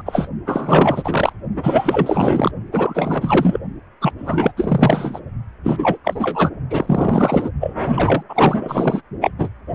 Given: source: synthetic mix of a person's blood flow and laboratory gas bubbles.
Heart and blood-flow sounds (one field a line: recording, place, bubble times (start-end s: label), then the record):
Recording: Doppler ultrasound of blood flow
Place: precordium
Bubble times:
0.00-0.02 s: bubbles
0.05-0.28 s: bubbles
0.46-1.32 s: bubbles
1.55-2.52 s: bubbles
2.71-3.59 s: bubbles
4.01-4.12 s: bubbles
4.18-4.52 s: bubbles
4.57-5.20 s: bubbles
5.63-5.97 s: bubbles
6.04-6.50 s: bubbles
6.70-7.50 s: bubbles
7.61-7.76 s: bubbles
7.94-8.23 s: bubbles
8.29-9.01 s: bubbles
9.20-9.31 s: bubbles
9.38-9.48 s: bubbles
From the record:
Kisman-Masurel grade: 444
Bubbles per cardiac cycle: continuous sound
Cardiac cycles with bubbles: 100%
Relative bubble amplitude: maximal (0.775 to 0.999)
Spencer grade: 4 (maximum detectable bubble signal sounding continuously throughout systole and diastole of every cardiac period, and overriding the amplitude of the normal cardiac signals)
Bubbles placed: only in the low amplitude regions of the cardiac cycle